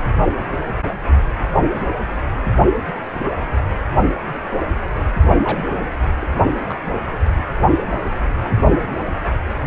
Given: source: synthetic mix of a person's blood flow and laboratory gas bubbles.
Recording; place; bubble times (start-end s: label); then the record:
Doppler ultrasound of blood flow; precordium
5.43-5.79 s: bubbles
6.21-6.27 s: bubbles
6.68-6.79 s: bubbles
7.37-7.41 s: bubbles
8.62-8.99 s: bubbles
9.63-9.67 s: bubbles
From the record:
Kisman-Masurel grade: 121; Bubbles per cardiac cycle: 1 to 2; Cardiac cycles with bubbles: 10 to 50%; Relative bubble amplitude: barely perceptible (0.100 to 0.250); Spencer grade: 2 (many but less than half of the cardiac periods contain bubble signals, singularly or in groups); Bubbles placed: anywhere in the cardiac cycle